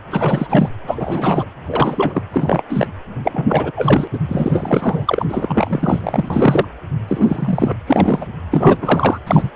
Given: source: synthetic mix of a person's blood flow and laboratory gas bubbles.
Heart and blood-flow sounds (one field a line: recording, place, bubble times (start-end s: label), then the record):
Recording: Doppler ultrasound of blood flow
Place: precordium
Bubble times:
0.10-0.71 s: bubbles
0.86-1.45 s: bubbles
1.66-2.22 s: bubbles
2.31-2.62 s: bubbles
2.69-2.88 s: bubbles
3.24-3.71 s: bubbles
3.76-4.08 s: bubbles
4.12-4.19 s: bubbles
4.28-6.65 s: bubbles
7.08-7.76 s: bubbles
7.86-8.25 s: bubbles
8.51-8.77 s: bubbles
8.81-9.19 s: bubbles
9.26-9.51 s: bubbles
From the record:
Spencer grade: 3 (all of the cardiac periods contain showers or single bubble signals, but not dominating or overriding the cardiac motion signals)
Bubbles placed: anywhere in the cardiac cycle